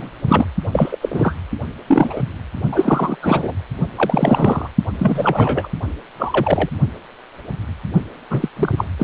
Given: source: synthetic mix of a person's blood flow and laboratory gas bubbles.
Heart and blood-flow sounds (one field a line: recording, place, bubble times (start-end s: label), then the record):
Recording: Doppler ultrasound of blood flow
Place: precordium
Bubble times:
0.00-0.11 s: bubbles
0.28-0.46 s: bubbles
0.72-0.98 s: bubbles
1.02-1.34 s: bubbles
1.87-2.22 s: bubbles
2.72-3.17 s: bubbles
3.22-3.53 s: bubbles
3.96-4.69 s: bubbles
4.99-5.69 s: bubbles
6.18-6.70 s: bubbles
8.30-8.49 s: bubbles
8.56-8.84 s: bubbles
8.98-9.04 s: bubbles
From the record:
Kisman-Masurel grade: 233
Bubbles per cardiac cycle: several, 3 to 8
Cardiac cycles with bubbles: 50 to 99%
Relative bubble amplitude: loud (0.450 to 0.775)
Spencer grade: 3 (all of the cardiac periods contain showers or single bubble signals, but not dominating or overriding the cardiac motion signals)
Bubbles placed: only in the low amplitude regions of the cardiac cycle